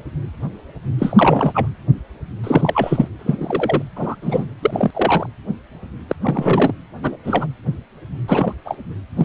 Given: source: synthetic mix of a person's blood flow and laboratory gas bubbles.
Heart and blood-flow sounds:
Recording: Doppler ultrasound of blood flow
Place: precordium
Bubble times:
0.98-1.68 s: bubbles
2.44-3.08 s: bubbles
3.19-3.82 s: bubbles
3.96-4.15 s: bubbles
4.21-4.45 s: bubbles
4.62-4.91 s: bubbles
4.93-5.26 s: bubbles
6.08-6.16 s: bubbles
6.22-6.74 s: bubbles
7.01-7.17 s: bubbles
7.25-7.46 s: bubbles
8.28-8.53 s: bubbles
8.65-8.78 s: bubbles
9.17-9.25 s: bubbles
From the record:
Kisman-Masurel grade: 233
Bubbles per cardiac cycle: several, 3 to 8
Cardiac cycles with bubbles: 50 to 99%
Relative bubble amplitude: loud (0.450 to 0.775)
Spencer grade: 3 (all of the cardiac periods contain showers or single bubble signals, but not dominating or overriding the cardiac motion signals)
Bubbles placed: anywhere in the cardiac cycle

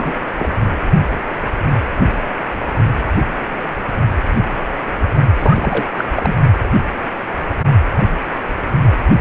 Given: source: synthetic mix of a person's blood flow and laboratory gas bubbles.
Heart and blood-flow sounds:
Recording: Doppler ultrasound of blood flow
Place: precordium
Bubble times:
0.00-0.14 s: bubbles
0.39-0.53 s: bubbles
5.38-5.90 s: bubbles
5.96-6.04 s: bubbles
6.14-6.35 s: bubbles
From the record:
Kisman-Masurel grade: 222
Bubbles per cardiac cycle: several, 3 to 8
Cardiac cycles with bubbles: 10 to 50%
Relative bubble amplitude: moderate (0.250 to 0.450)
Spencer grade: 2 (many but less than half of the cardiac periods contain bubble signals, singularly or in groups)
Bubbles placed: only in the low amplitude regions of the cardiac cycle

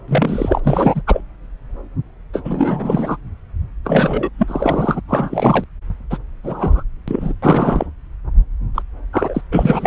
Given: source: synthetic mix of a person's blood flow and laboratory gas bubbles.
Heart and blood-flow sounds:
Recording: Doppler ultrasound of blood flow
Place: subclavian vein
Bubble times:
0.08-0.59 s: bubbles
0.64-1.01 s: bubbles
1.06-1.20 s: bubbles
2.33-2.41 s: bubbles
2.44-3.17 s: bubbles
3.84-4.29 s: bubbles
4.38-5.01 s: bubbles
5.08-5.64 s: bubbles
6.10-6.18 s: bubbles
6.44-6.83 s: bubbles
7.08-7.33 s: bubbles
7.42-7.87 s: bubbles
8.75-8.82 s: bubbles
9.12-9.41 s: bubbles
9.52-9.87 s: bubbles
From the record:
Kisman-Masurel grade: 233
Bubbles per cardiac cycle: several, 3 to 8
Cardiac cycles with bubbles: 50 to 99%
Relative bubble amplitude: loud (0.450 to 0.775)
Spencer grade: 3 (all of the cardiac periods contain showers or single bubble signals, but not dominating or overriding the cardiac motion signals)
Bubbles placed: anywhere in the cardiac cycle

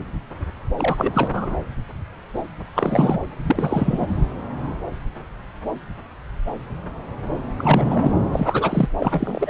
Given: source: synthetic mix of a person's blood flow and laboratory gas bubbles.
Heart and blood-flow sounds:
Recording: Doppler ultrasound of blood flow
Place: subclavian vein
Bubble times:
0.78-1.57 s: bubbles
2.75-3.19 s: bubbles
3.46-4.06 s: bubbles
7.58-8.11 s: bubbles
8.33-8.89 s: bubbles
8.99-9.50 s: bubbles
From the record:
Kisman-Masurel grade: 332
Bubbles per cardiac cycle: rolling drumbeat, 9 or more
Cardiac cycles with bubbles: 50 to 99%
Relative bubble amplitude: moderate (0.250 to 0.450)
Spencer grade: 3 (all of the cardiac periods contain showers or single bubble signals, but not dominating or overriding the cardiac motion signals)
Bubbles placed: anywhere in the cardiac cycle

